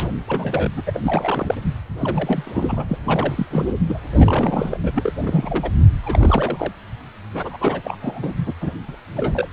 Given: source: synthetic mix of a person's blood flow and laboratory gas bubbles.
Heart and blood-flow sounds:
Doppler ultrasound of blood flow; precordium
0.00-0.11 s: bubbles
0.27-0.70 s: bubbles
0.76-0.81 s: bubbles
0.86-1.00 s: bubbles
1.03-1.54 s: bubbles
1.97-2.85 s: bubbles
2.88-2.97 s: bubbles
3.04-3.46 s: bubbles
3.50-3.73 s: bubbles
3.88-4.00 s: bubbles
4.12-4.80 s: bubbles
4.83-5.12 s: bubbles
5.22-5.71 s: bubbles
6.03-6.73 s: bubbles
7.33-7.58 s: bubbles
7.60-7.98 s: bubbles
8.00-8.33 s: bubbles
8.36-8.54 s: bubbles
8.61-8.72 s: bubbles
8.88-8.96 s: bubbles
9.17-9.48 s: bubbles
From the record:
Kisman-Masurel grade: 342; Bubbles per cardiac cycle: rolling drumbeat, 9 or more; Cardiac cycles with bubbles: 100%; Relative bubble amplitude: moderate (0.250 to 0.450); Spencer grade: 3 (all of the cardiac periods contain showers or single bubble signals, but not dominating or overriding the cardiac motion signals); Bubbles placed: anywhere in the cardiac cycle

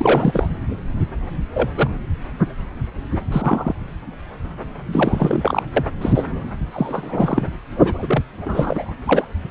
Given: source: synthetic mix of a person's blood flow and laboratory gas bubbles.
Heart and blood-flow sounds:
Doppler ultrasound of blood flow; subclavian vein
0.00-0.48 s: bubbles
1.54-1.69 s: bubbles
1.77-1.90 s: bubbles
3.32-3.73 s: bubbles
4.87-5.62 s: bubbles
5.76-5.85 s: bubbles
6.01-6.26 s: bubbles
6.71-7.47 s: bubbles
7.75-8.25 s: bubbles
8.46-8.92 s: bubbles
9.06-9.25 s: bubbles
From the record:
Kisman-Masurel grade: 232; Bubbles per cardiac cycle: several, 3 to 8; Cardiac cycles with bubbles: 50 to 99%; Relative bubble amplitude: moderate (0.250 to 0.450); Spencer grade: 3 (all of the cardiac periods contain showers or single bubble signals, but not dominating or overriding the cardiac motion signals); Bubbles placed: anywhere in the cardiac cycle

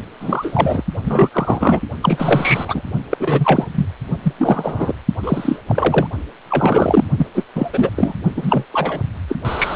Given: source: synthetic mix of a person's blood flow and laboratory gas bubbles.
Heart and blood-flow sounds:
Doppler ultrasound of blood flow; precordium
0.00-0.02 s: bubbles
0.19-0.83 s: bubbles
1.04-1.30 s: bubbles
1.32-1.81 s: bubbles
2.02-2.82 s: bubbles
3.10-3.17 s: bubbles
3.19-3.67 s: bubbles
3.75-3.86 s: bubbles
4.23-4.34 s: bubbles
4.38-4.95 s: bubbles
5.23-5.60 s: bubbles
5.69-6.07 s: bubbles
6.50-7.04 s: bubbles
7.18-7.27 s: bubbles
7.35-7.44 s: bubbles
7.55-7.70 s: bubbles
7.73-7.91 s: bubbles
7.96-8.13 s: bubbles
8.37-8.66 s: bubbles
8.73-9.01 s: bubbles
9.29-9.37 s: bubbles
9.45-9.76 s: bubbles
From the record:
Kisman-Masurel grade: 343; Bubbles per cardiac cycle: rolling drumbeat, 9 or more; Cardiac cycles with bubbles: 100%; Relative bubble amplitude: loud (0.450 to 0.775); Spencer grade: 3 (all of the cardiac periods contain showers or single bubble signals, but not dominating or overriding the cardiac motion signals); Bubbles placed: only in the low amplitude regions of the cardiac cycle

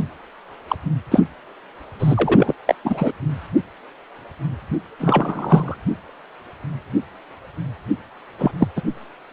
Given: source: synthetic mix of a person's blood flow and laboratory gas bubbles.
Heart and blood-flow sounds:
Doppler ultrasound of blood flow; precordium
0.68-0.76 s: bubbles
1.11-1.21 s: bubbles
1.99-2.54 s: bubbles
2.67-2.75 s: bubbles
2.84-3.12 s: bubbles
4.98-5.77 s: bubbles
8.38-8.52 s: bubbles
8.60-8.68 s: bubbles
8.76-8.82 s: bubbles
From the record:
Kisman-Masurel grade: 233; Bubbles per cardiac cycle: several, 3 to 8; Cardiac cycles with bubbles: 50 to 99%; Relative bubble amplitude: loud (0.450 to 0.775); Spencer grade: 3 (all of the cardiac periods contain showers or single bubble signals, but not dominating or overriding the cardiac motion signals); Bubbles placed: anywhere in the cardiac cycle

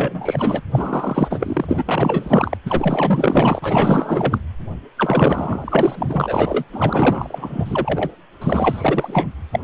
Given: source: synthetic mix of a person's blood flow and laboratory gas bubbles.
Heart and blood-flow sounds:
Doppler ultrasound of blood flow; precordium
0.00-0.61 s: bubbles
0.74-2.58 s: bubbles
2.65-4.39 s: bubbles
4.97-6.64 s: bubbles
6.73-8.11 s: bubbles
8.41-9.29 s: bubbles
9.52-9.60 s: bubbles
From the record:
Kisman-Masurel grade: 444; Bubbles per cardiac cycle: continuous sound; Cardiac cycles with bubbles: 100%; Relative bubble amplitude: maximal (0.775 to 0.999); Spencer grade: 4 (maximum detectable bubble signal sounding continuously throughout systole and diastole of every cardiac period, and overriding the amplitude of the normal cardiac signals); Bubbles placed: anywhere in the cardiac cycle

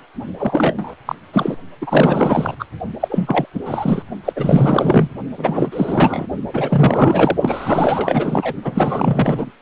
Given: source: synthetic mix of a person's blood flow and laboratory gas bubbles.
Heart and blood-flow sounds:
Doppler ultrasound of blood flow; precordium
0.38-0.95 s: bubbles
1.06-1.15 s: bubbles
1.32-1.56 s: bubbles
1.81-2.54 s: bubbles
2.59-2.65 s: bubbles
3.00-3.46 s: bubbles
3.54-3.60 s: bubbles
3.65-4.03 s: bubbles
4.25-4.33 s: bubbles
4.36-5.09 s: bubbles
5.38-6.27 s: bubbles
6.53-7.37 s: bubbles
7.41-8.53 s: bubbles
8.64-9.51 s: bubbles
From the record:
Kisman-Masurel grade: 444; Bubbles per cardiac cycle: continuous sound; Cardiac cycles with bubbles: 100%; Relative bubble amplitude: maximal (0.775 to 0.999); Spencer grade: 4 (maximum detectable bubble signal sounding continuously throughout systole and diastole of every cardiac period, and overriding the amplitude of the normal cardiac signals); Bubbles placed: only in the low amplitude regions of the cardiac cycle

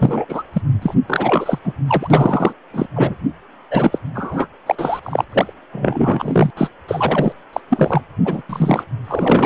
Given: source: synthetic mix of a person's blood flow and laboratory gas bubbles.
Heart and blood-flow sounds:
Doppler ultrasound of blood flow; precordium
0.00-0.25 s: bubbles
0.28-0.42 s: bubbles
0.52-0.61 s: bubbles
0.81-0.94 s: bubbles
1.08-1.58 s: bubbles
1.64-1.74 s: bubbles
1.87-2.54 s: bubbles
2.73-2.86 s: bubbles
2.94-3.15 s: bubbles
3.70-3.98 s: bubbles
4.14-4.47 s: bubbles
4.66-4.75 s: bubbles
4.78-5.00 s: bubbles
5.03-5.25 s: bubbles
5.30-5.53 s: bubbles
5.72-6.51 s: bubbles
6.57-6.69 s: bubbles
6.88-7.33 s: bubbles
7.53-7.61 s: bubbles
7.70-8.01 s: bubbles
8.24-8.42 s: bubbles
8.49-8.84 s: bubbles
9.04-9.46 s: bubbles
From the record:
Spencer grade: 4 (maximum detectable bubble signal sounding continuously throughout systole and diastole of every cardiac period, and overriding the amplitude of the normal cardiac signals); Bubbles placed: anywhere in the cardiac cycle

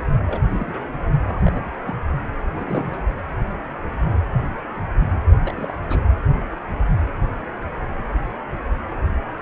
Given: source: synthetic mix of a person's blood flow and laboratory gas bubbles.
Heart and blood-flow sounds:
Doppler ultrasound of blood flow; precordium
0.26-0.42 s: bubbles
0.50-0.87 s: bubbles
1.24-1.70 s: bubbles
1.82-1.97 s: bubbles
2.54-3.02 s: bubbles
5.42-5.53 s: bubbles
5.56-5.75 s: bubbles
5.89-6.00 s: bubbles
From the record:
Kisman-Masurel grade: 221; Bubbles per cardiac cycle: several, 3 to 8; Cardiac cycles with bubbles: 10 to 50%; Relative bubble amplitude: barely perceptible (0.100 to 0.250); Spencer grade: 2 (many but less than half of the cardiac periods contain bubble signals, singularly or in groups); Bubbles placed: anywhere in the cardiac cycle

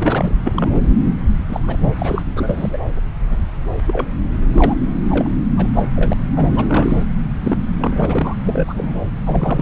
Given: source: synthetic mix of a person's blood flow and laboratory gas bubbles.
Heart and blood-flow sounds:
Doppler ultrasound of blood flow; subclavian vein
0.00-0.32 s: bubbles
0.44-0.87 s: bubbles
1.48-1.75 s: bubbles
1.81-1.94 s: bubbles
1.99-2.22 s: bubbles
2.35-2.77 s: bubbles
3.29-3.37 s: bubbles
3.77-3.80 s: bubbles
3.86-4.08 s: bubbles
4.54-4.76 s: bubbles
5.10-5.29 s: bubbles
5.57-5.90 s: bubbles
5.96-6.14 s: bubbles
6.36-6.65 s: bubbles
6.68-7.04 s: bubbles
7.43-7.58 s: bubbles
7.78-8.36 s: bubbles
8.44-8.93 s: bubbles
9.25-9.62 s: bubbles
From the record:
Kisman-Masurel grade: 242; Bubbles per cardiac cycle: several, 3 to 8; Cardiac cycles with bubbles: 100%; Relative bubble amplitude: moderate (0.250 to 0.450); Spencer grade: 3 (all of the cardiac periods contain showers or single bubble signals, but not dominating or overriding the cardiac motion signals); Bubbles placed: anywhere in the cardiac cycle

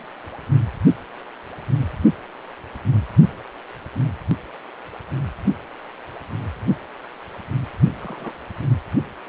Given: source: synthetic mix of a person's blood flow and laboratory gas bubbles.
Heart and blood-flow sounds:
Doppler ultrasound of blood flow; precordium
8.01-8.32 s: bubbles
From the record:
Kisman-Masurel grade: 111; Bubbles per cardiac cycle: 1 to 2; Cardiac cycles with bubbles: 1 to 10%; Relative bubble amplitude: barely perceptible (0.100 to 0.250); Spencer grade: 1 (occasional bubble signal discernible with the cardiac motion signal, with majority of cardiac periods free of bubbles); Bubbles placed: only in the low amplitude regions of the cardiac cycle

